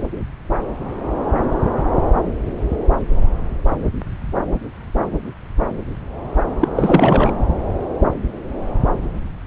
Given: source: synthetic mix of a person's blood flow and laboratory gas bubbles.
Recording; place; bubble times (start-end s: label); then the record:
Doppler ultrasound of blood flow; subclavian vein
6.60-6.68 s: bubbles
6.75-7.31 s: bubbles
From the record:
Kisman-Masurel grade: 223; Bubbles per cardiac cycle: several, 3 to 8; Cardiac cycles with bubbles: 10 to 50%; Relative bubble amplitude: loud (0.450 to 0.775); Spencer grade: 2 (many but less than half of the cardiac periods contain bubble signals, singularly or in groups); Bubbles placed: anywhere in the cardiac cycle